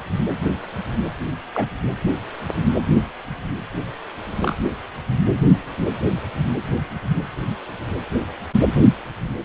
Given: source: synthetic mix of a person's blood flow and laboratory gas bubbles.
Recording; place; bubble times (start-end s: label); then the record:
Doppler ultrasound of blood flow; precordium
1.54-1.68 s: bubbles
4.41-4.55 s: bubbles
From the record:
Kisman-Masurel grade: 122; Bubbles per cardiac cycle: 1 to 2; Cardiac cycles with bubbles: 10 to 50%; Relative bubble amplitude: moderate (0.250 to 0.450); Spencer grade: 2 (many but less than half of the cardiac periods contain bubble signals, singularly or in groups); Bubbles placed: anywhere in the cardiac cycle